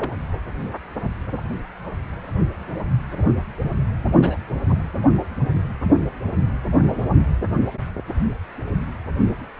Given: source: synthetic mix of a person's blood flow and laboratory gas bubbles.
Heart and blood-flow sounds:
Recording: Doppler ultrasound of blood flow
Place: precordium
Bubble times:
0.00-0.12 s: bubbles
4.17-4.37 s: bubbles
4.69-4.75 s: bubbles
6.91-7.03 s: bubbles
From the record:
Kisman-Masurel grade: 121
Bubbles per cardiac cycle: 1 to 2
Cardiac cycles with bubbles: 10 to 50%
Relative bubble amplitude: barely perceptible (0.100 to 0.250)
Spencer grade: 2 (many but less than half of the cardiac periods contain bubble signals, singularly or in groups)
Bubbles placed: anywhere in the cardiac cycle

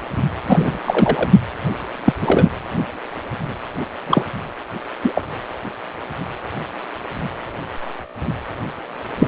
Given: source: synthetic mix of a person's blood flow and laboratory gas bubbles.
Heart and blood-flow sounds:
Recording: Doppler ultrasound of blood flow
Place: precordium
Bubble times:
0.46-0.78 s: bubbles
0.84-1.29 s: bubbles
2.04-2.13 s: bubbles
2.21-2.49 s: bubbles
4.06-4.25 s: bubbles
5.03-5.22 s: bubbles
9.19-9.28 s: bubbles
From the record:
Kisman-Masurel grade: 223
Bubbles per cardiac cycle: several, 3 to 8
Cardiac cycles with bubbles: 10 to 50%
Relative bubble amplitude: loud (0.450 to 0.775)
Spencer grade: 2 (many but less than half of the cardiac periods contain bubble signals, singularly or in groups)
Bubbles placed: anywhere in the cardiac cycle

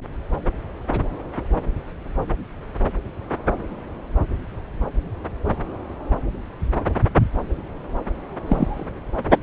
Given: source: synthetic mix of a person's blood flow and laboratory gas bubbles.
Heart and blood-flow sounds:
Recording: Doppler ultrasound of blood flow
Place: subclavian vein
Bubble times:
8.46-8.88 s: bubbles
From the record:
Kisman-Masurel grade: 112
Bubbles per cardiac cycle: 1 to 2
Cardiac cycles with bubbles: 1 to 10%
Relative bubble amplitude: moderate (0.250 to 0.450)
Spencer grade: 1 (occasional bubble signal discernible with the cardiac motion signal, with majority of cardiac periods free of bubbles)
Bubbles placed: anywhere in the cardiac cycle

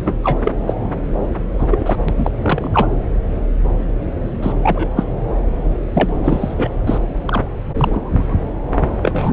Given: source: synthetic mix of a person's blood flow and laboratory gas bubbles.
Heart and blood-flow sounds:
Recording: Doppler ultrasound of blood flow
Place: subclavian vein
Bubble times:
0.00-0.13 s: bubbles
0.23-0.40 s: bubbles
0.45-0.51 s: bubbles
0.67-0.74 s: bubbles
1.58-1.68 s: bubbles
1.71-1.96 s: bubbles
2.08-2.13 s: bubbles
2.17-2.31 s: bubbles
2.42-2.88 s: bubbles
4.42-4.53 s: bubbles
4.62-4.88 s: bubbles
4.96-5.04 s: bubbles
5.93-6.12 s: bubbles
6.24-6.68 s: bubbles
6.87-6.98 s: bubbles
7.26-7.42 s: bubbles
7.78-8.35 s: bubbles
9.03-9.33 s: bubbles
From the record:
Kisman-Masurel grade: 243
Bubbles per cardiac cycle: several, 3 to 8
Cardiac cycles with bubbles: 100%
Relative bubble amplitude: loud (0.450 to 0.775)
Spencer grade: 3 (all of the cardiac periods contain showers or single bubble signals, but not dominating or overriding the cardiac motion signals)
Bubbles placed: anywhere in the cardiac cycle

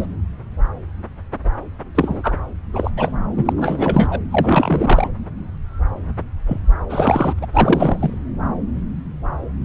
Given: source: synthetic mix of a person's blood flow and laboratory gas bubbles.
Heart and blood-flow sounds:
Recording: Doppler ultrasound of blood flow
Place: subclavian vein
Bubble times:
0.00-0.07 s: bubbles
1.94-2.33 s: bubbles
2.73-2.91 s: bubbles
2.96-3.11 s: bubbles
3.37-3.53 s: bubbles
3.57-4.20 s: bubbles
4.30-5.10 s: bubbles
6.47-6.60 s: bubbles
6.89-7.34 s: bubbles
7.38-7.46 s: bubbles
7.53-8.19 s: bubbles
From the record:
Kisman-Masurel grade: 333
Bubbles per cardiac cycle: rolling drumbeat, 9 or more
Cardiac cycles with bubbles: 50 to 99%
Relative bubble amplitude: loud (0.450 to 0.775)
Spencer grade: 3 (all of the cardiac periods contain showers or single bubble signals, but not dominating or overriding the cardiac motion signals)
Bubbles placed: anywhere in the cardiac cycle

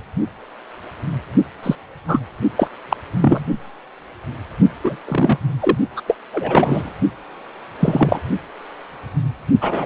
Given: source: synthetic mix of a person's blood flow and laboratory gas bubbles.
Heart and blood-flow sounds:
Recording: Doppler ultrasound of blood flow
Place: precordium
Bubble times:
1.62-1.75 s: bubbles
2.08-2.20 s: bubbles
2.57-2.69 s: bubbles
2.89-2.97 s: bubbles
3.13-3.44 s: bubbles
4.84-4.96 s: bubbles
5.05-5.38 s: bubbles
5.61-5.77 s: bubbles
5.96-6.01 s: bubbles
6.08-6.16 s: bubbles
6.33-6.92 s: bubbles
7.79-8.21 s: bubbles
9.61-9.86 s: bubbles
From the record:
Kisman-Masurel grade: 233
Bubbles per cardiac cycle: several, 3 to 8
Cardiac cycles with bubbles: 50 to 99%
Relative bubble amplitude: loud (0.450 to 0.775)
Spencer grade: 3 (all of the cardiac periods contain showers or single bubble signals, but not dominating or overriding the cardiac motion signals)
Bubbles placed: only in the low amplitude regions of the cardiac cycle

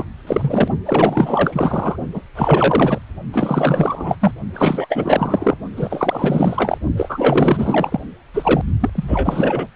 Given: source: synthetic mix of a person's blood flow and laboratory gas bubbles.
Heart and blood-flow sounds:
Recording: Doppler ultrasound of blood flow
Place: precordium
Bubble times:
0.00-0.05 s: bubbles
0.27-0.69 s: bubbles
0.85-1.96 s: bubbles
2.13-2.22 s: bubbles
2.35-2.98 s: bubbles
3.31-4.17 s: bubbles
4.21-4.33 s: bubbles
4.54-5.57 s: bubbles
5.76-6.78 s: bubbles
6.97-8.00 s: bubbles
8.34-8.63 s: bubbles
8.80-8.90 s: bubbles
8.95-9.68 s: bubbles
From the record:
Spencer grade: 4 (maximum detectable bubble signal sounding continuously throughout systole and diastole of every cardiac period, and overriding the amplitude of the normal cardiac signals)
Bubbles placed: only in the low amplitude regions of the cardiac cycle

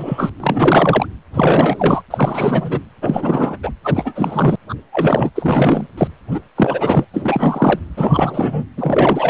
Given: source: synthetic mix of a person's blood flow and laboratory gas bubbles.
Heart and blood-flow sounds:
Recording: Doppler ultrasound of blood flow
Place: precordium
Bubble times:
0.00-0.29 s: bubbles
0.40-1.06 s: bubbles
1.34-2.02 s: bubbles
2.10-2.79 s: bubbles
3.01-3.58 s: bubbles
3.63-3.72 s: bubbles
3.84-4.55 s: bubbles
4.68-4.74 s: bubbles
4.92-5.30 s: bubbles
5.35-5.87 s: bubbles
5.97-6.08 s: bubbles
6.31-6.40 s: bubbles
6.55-7.04 s: bubbles
7.13-7.79 s: bubbles
7.97-8.65 s: bubbles
8.77-9.30 s: bubbles
From the record:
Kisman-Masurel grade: 343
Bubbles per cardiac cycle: rolling drumbeat, 9 or more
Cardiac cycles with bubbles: 100%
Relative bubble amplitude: loud (0.450 to 0.775)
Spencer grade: 3 (all of the cardiac periods contain showers or single bubble signals, but not dominating or overriding the cardiac motion signals)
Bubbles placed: anywhere in the cardiac cycle

